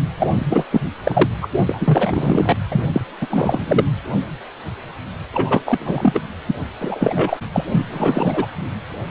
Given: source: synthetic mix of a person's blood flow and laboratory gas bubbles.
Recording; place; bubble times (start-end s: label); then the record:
Doppler ultrasound of blood flow; precordium
0.18-0.27 s: bubbles
0.35-0.66 s: bubbles
0.71-0.81 s: bubbles
1.05-1.28 s: bubbles
1.41-1.49 s: bubbles
1.67-2.56 s: bubbles
2.70-2.88 s: bubbles
2.93-3.01 s: bubbles
3.20-3.27 s: bubbles
3.29-3.85 s: bubbles
5.33-5.60 s: bubbles
5.66-6.21 s: bubbles
6.47-6.55 s: bubbles
6.80-7.37 s: bubbles
7.53-7.65 s: bubbles
7.71-7.86 s: bubbles
7.91-8.46 s: bubbles
From the record:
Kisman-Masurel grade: 333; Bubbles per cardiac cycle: rolling drumbeat, 9 or more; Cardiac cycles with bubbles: 50 to 99%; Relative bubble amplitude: loud (0.450 to 0.775); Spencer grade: 3 (all of the cardiac periods contain showers or single bubble signals, but not dominating or overriding the cardiac motion signals); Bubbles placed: anywhere in the cardiac cycle